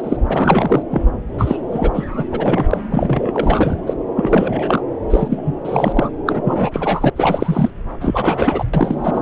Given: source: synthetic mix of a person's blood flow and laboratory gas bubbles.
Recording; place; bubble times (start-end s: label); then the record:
Doppler ultrasound of blood flow; subclavian vein
0.00-0.17 s: bubbles
0.28-0.82 s: bubbles
0.91-1.02 s: bubbles
1.38-1.56 s: bubbles
1.72-2.04 s: bubbles
2.14-2.25 s: bubbles
2.32-2.67 s: bubbles
2.71-2.78 s: bubbles
2.91-3.77 s: bubbles
3.86-3.94 s: bubbles
4.16-4.83 s: bubbles
5.10-5.54 s: bubbles
5.65-6.10 s: bubbles
6.26-6.41 s: bubbles
6.44-7.10 s: bubbles
7.16-7.70 s: bubbles
8.00-8.64 s: bubbles
8.73-9.21 s: bubbles
From the record:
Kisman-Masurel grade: 343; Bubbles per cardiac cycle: rolling drumbeat, 9 or more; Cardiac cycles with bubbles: 100%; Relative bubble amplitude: loud (0.450 to 0.775); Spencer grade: 3 (all of the cardiac periods contain showers or single bubble signals, but not dominating or overriding the cardiac motion signals); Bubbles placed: anywhere in the cardiac cycle